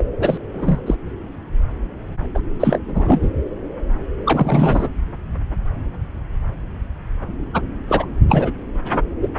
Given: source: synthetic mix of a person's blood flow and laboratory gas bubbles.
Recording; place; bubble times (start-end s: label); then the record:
Doppler ultrasound of blood flow; subclavian vein
0.00-0.04 s: bubbles
0.19-0.38 s: bubbles
0.54-0.81 s: bubbles
0.86-0.95 s: bubbles
2.34-2.41 s: bubbles
2.59-2.79 s: bubbles
2.88-3.28 s: bubbles
4.26-4.88 s: bubbles
7.54-7.61 s: bubbles
7.89-8.05 s: bubbles
8.29-8.51 s: bubbles
8.89-9.00 s: bubbles
9.21-9.29 s: bubbles
From the record:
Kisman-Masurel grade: 233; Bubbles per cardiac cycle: several, 3 to 8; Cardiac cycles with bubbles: 50 to 99%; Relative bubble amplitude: loud (0.450 to 0.775); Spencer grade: 3 (all of the cardiac periods contain showers or single bubble signals, but not dominating or overriding the cardiac motion signals); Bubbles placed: anywhere in the cardiac cycle